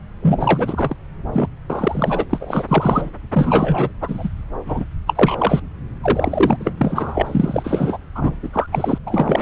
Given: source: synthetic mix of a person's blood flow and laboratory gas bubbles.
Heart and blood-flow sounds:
Doppler ultrasound of blood flow; subclavian vein
0.22-0.97 s: bubbles
1.32-1.49 s: bubbles
1.70-2.25 s: bubbles
2.29-3.09 s: bubbles
3.33-3.90 s: bubbles
4.00-4.29 s: bubbles
4.66-4.85 s: bubbles
5.07-5.60 s: bubbles
6.03-6.56 s: bubbles
6.60-6.72 s: bubbles
6.77-7.98 s: bubbles
8.15-8.36 s: bubbles
8.43-8.49 s: bubbles
8.53-8.68 s: bubbles
8.71-8.98 s: bubbles
9.06-9.42 s: bubbles
From the record:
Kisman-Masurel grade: 343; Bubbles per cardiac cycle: rolling drumbeat, 9 or more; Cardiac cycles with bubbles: 100%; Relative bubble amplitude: loud (0.450 to 0.775); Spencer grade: 3 (all of the cardiac periods contain showers or single bubble signals, but not dominating or overriding the cardiac motion signals); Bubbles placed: anywhere in the cardiac cycle

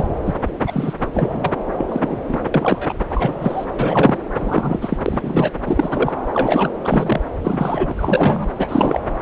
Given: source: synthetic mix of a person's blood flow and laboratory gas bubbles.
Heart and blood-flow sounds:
Doppler ultrasound of blood flow; subclavian vein
0.00-0.08 s: bubbles
0.25-0.34 s: bubbles
0.66-0.94 s: bubbles
1.14-1.52 s: bubbles
1.78-1.85 s: bubbles
1.89-2.18 s: bubbles
2.29-2.41 s: bubbles
2.54-2.93 s: bubbles
3.10-3.65 s: bubbles
3.74-4.18 s: bubbles
4.39-4.97 s: bubbles
5.06-5.51 s: bubbles
5.65-6.12 s: bubbles
6.34-6.69 s: bubbles
6.84-7.20 s: bubbles
7.42-8.49 s: bubbles
8.58-9.00 s: bubbles
From the record:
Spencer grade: 3 (all of the cardiac periods contain showers or single bubble signals, but not dominating or overriding the cardiac motion signals); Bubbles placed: anywhere in the cardiac cycle

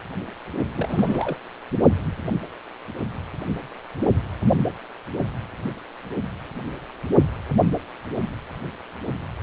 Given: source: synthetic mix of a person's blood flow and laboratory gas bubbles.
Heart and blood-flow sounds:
Doppler ultrasound of blood flow; precordium
0.74-1.37 s: bubbles
From the record:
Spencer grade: 1 (occasional bubble signal discernible with the cardiac motion signal, with majority of cardiac periods free of bubbles); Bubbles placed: only in the low amplitude regions of the cardiac cycle

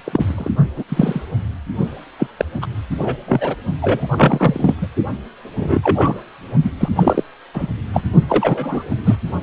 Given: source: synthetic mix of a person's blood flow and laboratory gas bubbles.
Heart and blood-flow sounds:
Doppler ultrasound of blood flow; precordium
0.04-0.52 s: bubbles
0.76-0.83 s: bubbles
0.89-1.22 s: bubbles
2.19-2.27 s: bubbles
2.37-2.45 s: bubbles
2.62-2.66 s: bubbles
2.98-3.16 s: bubbles
3.28-3.56 s: bubbles
3.82-4.07 s: bubbles
4.11-4.75 s: bubbles
4.81-4.88 s: bubbles
5.57-6.16 s: bubbles
6.64-6.71 s: bubbles
6.80-6.89 s: bubbles
6.96-7.24 s: bubbles
7.54-7.67 s: bubbles
7.93-8.02 s: bubbles
8.28-8.95 s: bubbles
9.04-9.15 s: bubbles
From the record:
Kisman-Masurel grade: 243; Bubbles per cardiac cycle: several, 3 to 8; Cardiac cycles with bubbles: 100%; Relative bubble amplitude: loud (0.450 to 0.775); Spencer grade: 3 (all of the cardiac periods contain showers or single bubble signals, but not dominating or overriding the cardiac motion signals); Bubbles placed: only in the low amplitude regions of the cardiac cycle

